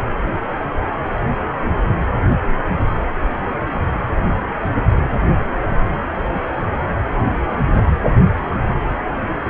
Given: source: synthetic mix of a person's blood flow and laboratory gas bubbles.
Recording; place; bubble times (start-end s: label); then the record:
Doppler ultrasound of blood flow; precordium
no bubbles
From the record:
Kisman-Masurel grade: 000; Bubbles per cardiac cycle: 0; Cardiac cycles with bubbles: 0%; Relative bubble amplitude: no bubbles discernible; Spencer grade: 0 (complete lack of bubble signals)